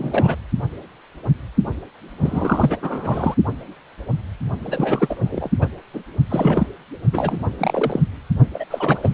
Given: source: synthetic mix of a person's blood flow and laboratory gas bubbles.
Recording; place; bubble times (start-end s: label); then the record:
Doppler ultrasound of blood flow; precordium
0.00-0.35 s: bubbles
2.21-2.77 s: bubbles
2.82-3.35 s: bubbles
4.62-5.50 s: bubbles
5.61-5.67 s: bubbles
5.94-6.00 s: bubbles
6.29-6.67 s: bubbles
7.11-7.50 s: bubbles
7.58-8.02 s: bubbles
8.54-8.65 s: bubbles
8.71-9.14 s: bubbles
From the record:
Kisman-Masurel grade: 332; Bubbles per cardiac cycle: rolling drumbeat, 9 or more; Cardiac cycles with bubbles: 50 to 99%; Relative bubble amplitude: moderate (0.250 to 0.450); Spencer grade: 3 (all of the cardiac periods contain showers or single bubble signals, but not dominating or overriding the cardiac motion signals); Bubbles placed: only in the low amplitude regions of the cardiac cycle